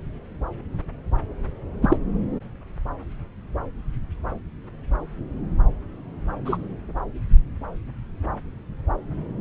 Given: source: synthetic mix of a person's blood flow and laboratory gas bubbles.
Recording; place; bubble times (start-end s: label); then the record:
Doppler ultrasound of blood flow; subclavian vein
1.82-1.97 s: bubbles
6.45-6.58 s: bubbles
From the record:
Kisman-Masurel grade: 123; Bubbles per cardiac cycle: 1 to 2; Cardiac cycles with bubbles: 10 to 50%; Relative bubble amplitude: loud (0.450 to 0.775); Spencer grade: 2 (many but less than half of the cardiac periods contain bubble signals, singularly or in groups); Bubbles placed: anywhere in the cardiac cycle